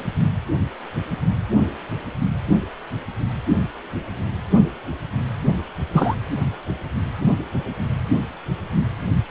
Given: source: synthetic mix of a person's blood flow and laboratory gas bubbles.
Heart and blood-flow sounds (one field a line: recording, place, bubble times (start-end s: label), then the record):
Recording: Doppler ultrasound of blood flow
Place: precordium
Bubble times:
5.94-6.16 s: bubbles
From the record:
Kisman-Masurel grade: 212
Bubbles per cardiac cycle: several, 3 to 8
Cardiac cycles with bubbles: 1 to 10%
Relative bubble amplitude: moderate (0.250 to 0.450)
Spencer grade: 1 (occasional bubble signal discernible with the cardiac motion signal, with majority of cardiac periods free of bubbles)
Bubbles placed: anywhere in the cardiac cycle